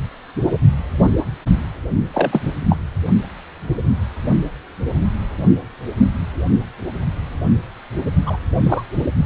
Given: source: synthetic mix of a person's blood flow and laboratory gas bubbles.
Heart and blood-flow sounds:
Doppler ultrasound of blood flow; precordium
2.12-2.41 s: bubbles
2.69-2.77 s: bubbles
8.26-8.37 s: bubbles
8.62-8.83 s: bubbles
From the record:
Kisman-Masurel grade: 222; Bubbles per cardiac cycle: several, 3 to 8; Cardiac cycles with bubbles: 10 to 50%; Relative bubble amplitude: moderate (0.250 to 0.450); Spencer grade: 2 (many but less than half of the cardiac periods contain bubble signals, singularly or in groups); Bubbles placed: only in the low amplitude regions of the cardiac cycle

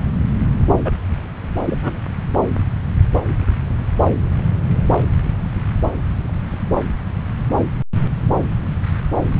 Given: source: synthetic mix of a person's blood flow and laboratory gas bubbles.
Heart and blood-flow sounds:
Doppler ultrasound of blood flow; subclavian vein
0.84-0.92 s: bubbles
1.66-2.00 s: bubbles
From the record:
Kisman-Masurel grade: 123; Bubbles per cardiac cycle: 1 to 2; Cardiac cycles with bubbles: 10 to 50%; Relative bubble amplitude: loud (0.450 to 0.775); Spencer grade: 2 (many but less than half of the cardiac periods contain bubble signals, singularly or in groups); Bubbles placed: anywhere in the cardiac cycle

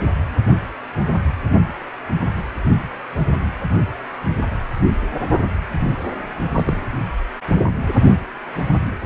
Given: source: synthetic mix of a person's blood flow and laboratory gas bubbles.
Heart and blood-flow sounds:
Doppler ultrasound of blood flow; precordium
6.54-6.80 s: bubbles
8.55-8.63 s: bubbles
From the record:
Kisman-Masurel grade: 122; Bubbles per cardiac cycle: 1 to 2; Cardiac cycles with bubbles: 10 to 50%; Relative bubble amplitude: moderate (0.250 to 0.450); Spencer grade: 2 (many but less than half of the cardiac periods contain bubble signals, singularly or in groups); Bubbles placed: anywhere in the cardiac cycle

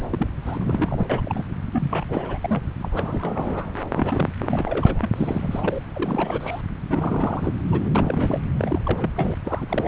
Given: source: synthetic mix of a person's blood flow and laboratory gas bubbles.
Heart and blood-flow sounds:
Doppler ultrasound of blood flow; subclavian vein
0.10-0.29 s: bubbles
0.45-1.44 s: bubbles
1.72-2.05 s: bubbles
2.08-2.63 s: bubbles
2.81-3.71 s: bubbles
3.74-3.79 s: bubbles
3.92-4.28 s: bubbles
4.41-5.09 s: bubbles
5.16-5.82 s: bubbles
5.94-6.62 s: bubbles
6.89-7.54 s: bubbles
7.65-7.89 s: bubbles
7.95-8.42 s: bubbles
8.57-8.81 s: bubbles
8.85-9.11 s: bubbles
9.15-9.35 s: bubbles
9.45-9.88 s: bubbles
From the record:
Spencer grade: 3 (all of the cardiac periods contain showers or single bubble signals, but not dominating or overriding the cardiac motion signals); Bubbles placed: anywhere in the cardiac cycle

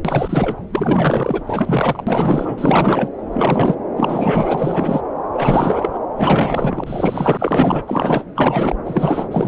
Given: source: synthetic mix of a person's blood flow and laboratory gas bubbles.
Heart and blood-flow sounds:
Doppler ultrasound of blood flow; subclavian vein
0.05-0.60 s: bubbles
0.73-1.45 s: bubbles
1.47-2.04 s: bubbles
2.06-3.10 s: bubbles
3.31-3.76 s: bubbles
3.96-5.01 s: bubbles
5.33-5.98 s: bubbles
6.17-7.82 s: bubbles
7.87-8.24 s: bubbles
8.35-8.75 s: bubbles
8.86-9.48 s: bubbles
From the record:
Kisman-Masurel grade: 444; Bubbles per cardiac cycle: continuous sound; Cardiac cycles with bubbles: 100%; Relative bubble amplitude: maximal (0.775 to 0.999); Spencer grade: 4 (maximum detectable bubble signal sounding continuously throughout systole and diastole of every cardiac period, and overriding the amplitude of the normal cardiac signals); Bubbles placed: anywhere in the cardiac cycle

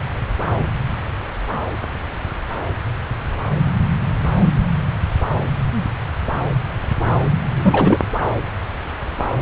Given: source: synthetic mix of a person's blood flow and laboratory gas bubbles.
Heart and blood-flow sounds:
Doppler ultrasound of blood flow; subclavian vein
7.54-7.98 s: bubbles
From the record:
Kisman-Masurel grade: 213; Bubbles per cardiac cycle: several, 3 to 8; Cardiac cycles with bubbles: 1 to 10%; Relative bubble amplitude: loud (0.450 to 0.775); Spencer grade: 1 (occasional bubble signal discernible with the cardiac motion signal, with majority of cardiac periods free of bubbles); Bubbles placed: anywhere in the cardiac cycle

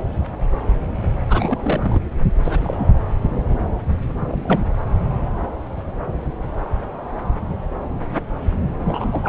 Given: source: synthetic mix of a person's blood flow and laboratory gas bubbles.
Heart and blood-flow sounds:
Doppler ultrasound of blood flow; subclavian vein
1.29-2.04 s: bubbles
2.43-3.00 s: bubbles
4.27-4.62 s: bubbles
8.85-9.29 s: bubbles
From the record:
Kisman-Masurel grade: 222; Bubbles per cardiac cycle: several, 3 to 8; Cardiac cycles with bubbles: 10 to 50%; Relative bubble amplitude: moderate (0.250 to 0.450); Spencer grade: 2 (many but less than half of the cardiac periods contain bubble signals, singularly or in groups); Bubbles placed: anywhere in the cardiac cycle

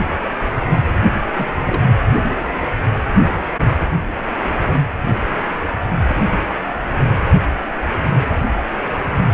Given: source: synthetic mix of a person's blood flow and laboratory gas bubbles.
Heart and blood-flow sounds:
Doppler ultrasound of blood flow; precordium
1.35-1.53 s: bubbles
1.66-1.82 s: bubbles
From the record:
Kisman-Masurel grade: 111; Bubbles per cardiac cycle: 1 to 2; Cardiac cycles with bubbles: 1 to 10%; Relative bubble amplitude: barely perceptible (0.100 to 0.250); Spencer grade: 1 (occasional bubble signal discernible with the cardiac motion signal, with majority of cardiac periods free of bubbles); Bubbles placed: anywhere in the cardiac cycle

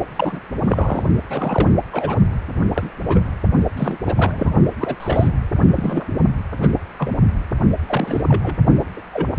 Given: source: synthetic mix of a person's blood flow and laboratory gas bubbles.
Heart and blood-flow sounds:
Doppler ultrasound of blood flow; precordium
0.16-0.40 s: bubbles
0.64-1.04 s: bubbles
1.29-1.69 s: bubbles
1.92-2.15 s: bubbles
2.73-2.90 s: bubbles
2.98-3.21 s: bubbles
3.77-3.98 s: bubbles
4.06-4.52 s: bubbles
4.79-4.96 s: bubbles
5.00-5.28 s: bubbles
5.75-6.06 s: bubbles
6.60-6.68 s: bubbles
6.97-7.17 s: bubbles
7.88-8.22 s: bubbles
8.29-8.56 s: bubbles
8.97-9.01 s: bubbles
9.12-9.28 s: bubbles
From the record:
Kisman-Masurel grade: 242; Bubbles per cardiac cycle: several, 3 to 8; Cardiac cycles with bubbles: 100%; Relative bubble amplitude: moderate (0.250 to 0.450); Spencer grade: 3 (all of the cardiac periods contain showers or single bubble signals, but not dominating or overriding the cardiac motion signals); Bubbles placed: only in the low amplitude regions of the cardiac cycle

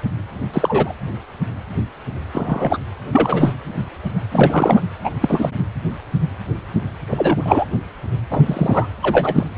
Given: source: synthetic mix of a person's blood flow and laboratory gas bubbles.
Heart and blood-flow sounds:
Doppler ultrasound of blood flow; precordium
0.53-0.92 s: bubbles
2.32-2.78 s: bubbles
3.12-3.52 s: bubbles
4.32-4.83 s: bubbles
5.04-5.11 s: bubbles
5.21-5.50 s: bubbles
7.11-7.65 s: bubbles
8.30-8.42 s: bubbles
8.46-8.90 s: bubbles
9.02-9.44 s: bubbles
From the record:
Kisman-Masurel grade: 223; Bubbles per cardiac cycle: several, 3 to 8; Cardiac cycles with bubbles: 10 to 50%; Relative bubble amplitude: loud (0.450 to 0.775); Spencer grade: 2 (many but less than half of the cardiac periods contain bubble signals, singularly or in groups); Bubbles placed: anywhere in the cardiac cycle

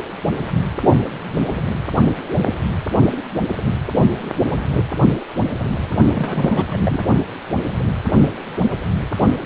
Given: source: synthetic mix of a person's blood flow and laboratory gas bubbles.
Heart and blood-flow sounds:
Doppler ultrasound of blood flow; precordium
6.11-7.04 s: bubbles
From the record:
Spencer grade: 1 (occasional bubble signal discernible with the cardiac motion signal, with majority of cardiac periods free of bubbles); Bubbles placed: only in the low amplitude regions of the cardiac cycle

